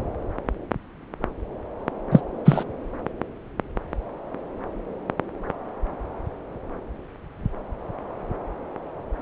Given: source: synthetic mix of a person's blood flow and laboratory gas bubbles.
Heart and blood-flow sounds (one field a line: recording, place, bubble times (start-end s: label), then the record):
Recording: Doppler ultrasound of blood flow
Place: subclavian vein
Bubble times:
2.11-2.20 s: bubbles
2.45-2.64 s: bubbles
From the record:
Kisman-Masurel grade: 113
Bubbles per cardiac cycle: 1 to 2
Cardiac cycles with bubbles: 1 to 10%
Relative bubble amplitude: loud (0.450 to 0.775)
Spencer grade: 1 (occasional bubble signal discernible with the cardiac motion signal, with majority of cardiac periods free of bubbles)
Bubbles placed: anywhere in the cardiac cycle